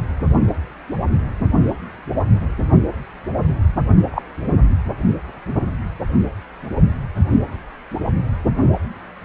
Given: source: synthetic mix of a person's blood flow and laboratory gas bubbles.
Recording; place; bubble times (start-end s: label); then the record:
Doppler ultrasound of blood flow; precordium
4.11-4.22 s: bubbles
From the record:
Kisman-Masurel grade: 113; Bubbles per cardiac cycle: 1 to 2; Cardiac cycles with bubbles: 1 to 10%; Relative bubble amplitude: loud (0.450 to 0.775); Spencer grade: 1 (occasional bubble signal discernible with the cardiac motion signal, with majority of cardiac periods free of bubbles); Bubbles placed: only in the low amplitude regions of the cardiac cycle